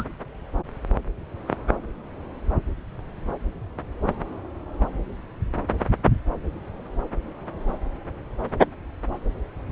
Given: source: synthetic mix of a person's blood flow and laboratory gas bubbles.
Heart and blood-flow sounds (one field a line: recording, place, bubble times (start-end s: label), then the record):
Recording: Doppler ultrasound of blood flow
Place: subclavian vein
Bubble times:
0.00-0.04 s: bubbles
From the record:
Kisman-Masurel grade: 213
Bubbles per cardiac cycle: several, 3 to 8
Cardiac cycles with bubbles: 1 to 10%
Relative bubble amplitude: loud (0.450 to 0.775)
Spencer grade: 1 (occasional bubble signal discernible with the cardiac motion signal, with majority of cardiac periods free of bubbles)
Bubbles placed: anywhere in the cardiac cycle